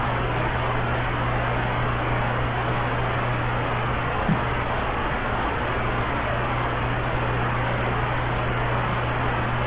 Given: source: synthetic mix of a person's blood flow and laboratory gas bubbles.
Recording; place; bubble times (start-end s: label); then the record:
Doppler ultrasound of blood flow; subclavian vein
4.27-4.38 s: bubbles
From the record:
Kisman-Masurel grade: 111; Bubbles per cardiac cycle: 1 to 2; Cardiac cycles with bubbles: 1 to 10%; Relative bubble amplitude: barely perceptible (0.100 to 0.250); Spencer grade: 1 (occasional bubble signal discernible with the cardiac motion signal, with majority of cardiac periods free of bubbles); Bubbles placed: anywhere in the cardiac cycle